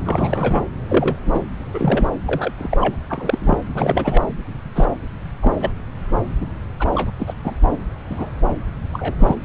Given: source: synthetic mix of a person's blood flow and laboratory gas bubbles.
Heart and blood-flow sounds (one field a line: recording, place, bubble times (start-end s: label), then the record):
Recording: Doppler ultrasound of blood flow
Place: subclavian vein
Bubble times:
0.06-0.62 s: bubbles
0.89-1.17 s: bubbles
1.26-1.42 s: bubbles
1.74-2.08 s: bubbles
2.25-2.53 s: bubbles
2.58-2.77 s: bubbles
2.80-2.96 s: bubbles
3.09-3.57 s: bubbles
3.74-4.22 s: bubbles
4.75-4.85 s: bubbles
5.42-5.53 s: bubbles
5.61-5.71 s: bubbles
6.41-6.46 s: bubbles
6.79-7.11 s: bubbles
7.19-7.34 s: bubbles
7.43-7.54 s: bubbles
8.10-8.30 s: bubbles
8.93-9.15 s: bubbles
9.20-9.36 s: bubbles
From the record:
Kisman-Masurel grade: 242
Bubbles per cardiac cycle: several, 3 to 8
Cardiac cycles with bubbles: 100%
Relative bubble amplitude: moderate (0.250 to 0.450)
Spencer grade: 3 (all of the cardiac periods contain showers or single bubble signals, but not dominating or overriding the cardiac motion signals)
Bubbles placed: anywhere in the cardiac cycle